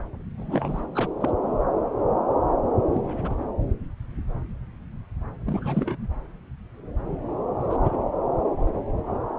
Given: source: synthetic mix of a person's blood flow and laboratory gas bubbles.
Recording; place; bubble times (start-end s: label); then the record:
Doppler ultrasound of blood flow; subclavian vein
0.37-0.86 s: bubbles
0.95-1.09 s: bubbles
1.20-1.32 s: bubbles
2.94-3.00 s: bubbles
3.05-3.34 s: bubbles
5.46-6.08 s: bubbles
7.71-7.77 s: bubbles
7.83-7.96 s: bubbles
From the record:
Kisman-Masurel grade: 221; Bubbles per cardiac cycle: several, 3 to 8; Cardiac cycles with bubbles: 10 to 50%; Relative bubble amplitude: barely perceptible (0.100 to 0.250); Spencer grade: 2 (many but less than half of the cardiac periods contain bubble signals, singularly or in groups); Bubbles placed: anywhere in the cardiac cycle